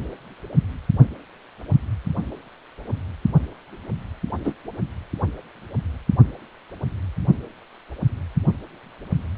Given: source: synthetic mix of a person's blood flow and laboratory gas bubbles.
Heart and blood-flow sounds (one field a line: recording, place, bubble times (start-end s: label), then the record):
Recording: Doppler ultrasound of blood flow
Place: precordium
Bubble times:
4.44-4.53 s: bubbles
From the record:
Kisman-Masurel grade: 122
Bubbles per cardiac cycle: 1 to 2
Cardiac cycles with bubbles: 10 to 50%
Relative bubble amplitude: moderate (0.250 to 0.450)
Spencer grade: 2 (many but less than half of the cardiac periods contain bubble signals, singularly or in groups)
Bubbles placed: only in the low amplitude regions of the cardiac cycle